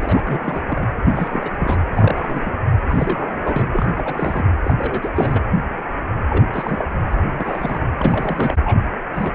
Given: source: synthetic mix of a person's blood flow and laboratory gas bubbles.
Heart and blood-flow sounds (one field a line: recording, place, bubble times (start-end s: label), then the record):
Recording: Doppler ultrasound of blood flow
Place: precordium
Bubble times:
0.00-0.62 s: bubbles
0.68-0.88 s: bubbles
1.05-1.84 s: bubbles
1.95-2.53 s: bubbles
2.88-3.68 s: bubbles
3.72-4.46 s: bubbles
4.64-4.74 s: bubbles
4.78-5.09 s: bubbles
5.16-5.41 s: bubbles
6.29-6.44 s: bubbles
6.53-6.83 s: bubbles
6.99-7.02 s: bubbles
7.06-7.21 s: bubbles
7.37-7.79 s: bubbles
7.99-8.56 s: bubbles
8.64-8.81 s: bubbles
9.14-9.35 s: bubbles
From the record:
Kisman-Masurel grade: 342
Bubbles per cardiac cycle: rolling drumbeat, 9 or more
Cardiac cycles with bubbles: 100%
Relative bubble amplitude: moderate (0.250 to 0.450)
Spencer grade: 3 (all of the cardiac periods contain showers or single bubble signals, but not dominating or overriding the cardiac motion signals)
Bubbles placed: anywhere in the cardiac cycle